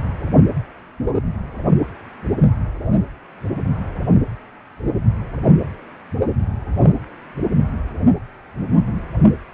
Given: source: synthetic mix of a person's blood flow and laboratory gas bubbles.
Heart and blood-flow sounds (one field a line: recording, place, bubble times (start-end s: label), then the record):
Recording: Doppler ultrasound of blood flow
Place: precordium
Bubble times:
6.73-6.92 s: bubbles
From the record:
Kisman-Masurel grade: 113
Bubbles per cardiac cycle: 1 to 2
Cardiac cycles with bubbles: 1 to 10%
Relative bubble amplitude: loud (0.450 to 0.775)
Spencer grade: 1 (occasional bubble signal discernible with the cardiac motion signal, with majority of cardiac periods free of bubbles)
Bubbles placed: anywhere in the cardiac cycle